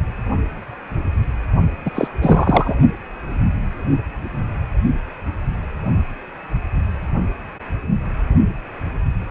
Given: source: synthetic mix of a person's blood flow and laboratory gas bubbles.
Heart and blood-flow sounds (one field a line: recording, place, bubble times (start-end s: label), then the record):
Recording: Doppler ultrasound of blood flow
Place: precordium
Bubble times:
1.85-1.90 s: bubbles
1.94-2.08 s: bubbles
2.21-2.75 s: bubbles
From the record:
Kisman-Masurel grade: 213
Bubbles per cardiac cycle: several, 3 to 8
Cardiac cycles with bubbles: 1 to 10%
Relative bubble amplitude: loud (0.450 to 0.775)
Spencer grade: 1 (occasional bubble signal discernible with the cardiac motion signal, with majority of cardiac periods free of bubbles)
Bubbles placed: only in the low amplitude regions of the cardiac cycle